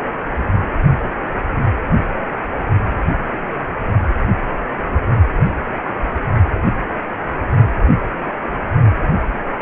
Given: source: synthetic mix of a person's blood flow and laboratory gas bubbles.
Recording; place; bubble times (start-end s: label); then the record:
Doppler ultrasound of blood flow; precordium
5.46-5.53 s: bubbles
5.58-5.63 s: bubbles
From the record:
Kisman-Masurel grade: 121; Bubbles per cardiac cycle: 1 to 2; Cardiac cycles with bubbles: 10 to 50%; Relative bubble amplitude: barely perceptible (0.100 to 0.250); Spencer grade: 2 (many but less than half of the cardiac periods contain bubble signals, singularly or in groups); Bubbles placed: only in the low amplitude regions of the cardiac cycle